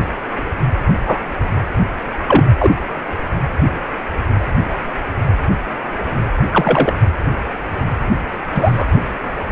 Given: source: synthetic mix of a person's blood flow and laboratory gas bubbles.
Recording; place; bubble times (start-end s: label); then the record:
Doppler ultrasound of blood flow; precordium
0.88-1.22 s: bubbles
2.27-2.49 s: bubbles
2.59-2.74 s: bubbles
6.52-6.98 s: bubbles
8.54-8.87 s: bubbles
From the record:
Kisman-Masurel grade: 123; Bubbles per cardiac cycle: 1 to 2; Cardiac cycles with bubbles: 10 to 50%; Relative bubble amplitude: loud (0.450 to 0.775); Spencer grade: 2 (many but less than half of the cardiac periods contain bubble signals, singularly or in groups); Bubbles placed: anywhere in the cardiac cycle